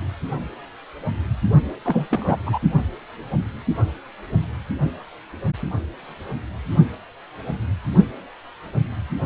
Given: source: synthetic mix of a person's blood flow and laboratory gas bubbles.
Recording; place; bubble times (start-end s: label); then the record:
Doppler ultrasound of blood flow; precordium
1.85-2.37 s: bubbles
2.46-2.58 s: bubbles
From the record:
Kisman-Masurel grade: 213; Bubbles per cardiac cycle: several, 3 to 8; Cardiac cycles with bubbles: 1 to 10%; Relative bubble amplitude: loud (0.450 to 0.775); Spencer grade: 1 (occasional bubble signal discernible with the cardiac motion signal, with majority of cardiac periods free of bubbles); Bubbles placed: only in the low amplitude regions of the cardiac cycle